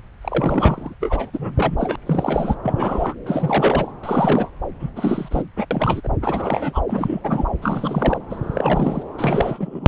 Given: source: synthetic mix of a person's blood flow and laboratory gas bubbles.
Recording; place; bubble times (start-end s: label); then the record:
Doppler ultrasound of blood flow; subclavian vein
0.22-0.94 s: bubbles
1.00-1.30 s: bubbles
1.32-1.96 s: bubbles
2.06-2.55 s: bubbles
2.63-3.15 s: bubbles
3.26-3.92 s: bubbles
4.03-4.50 s: bubbles
4.80-4.89 s: bubbles
4.96-5.42 s: bubbles
5.56-5.65 s: bubbles
5.71-6.00 s: bubbles
6.03-6.08 s: bubbles
6.21-6.81 s: bubbles
6.88-7.20 s: bubbles
7.23-7.46 s: bubbles
7.61-8.19 s: bubbles
8.29-9.03 s: bubbles
9.18-9.88 s: bubbles
From the record:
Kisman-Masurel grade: 332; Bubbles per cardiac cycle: rolling drumbeat, 9 or more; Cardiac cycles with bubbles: 50 to 99%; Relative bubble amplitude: moderate (0.250 to 0.450); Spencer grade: 3 (all of the cardiac periods contain showers or single bubble signals, but not dominating or overriding the cardiac motion signals); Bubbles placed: anywhere in the cardiac cycle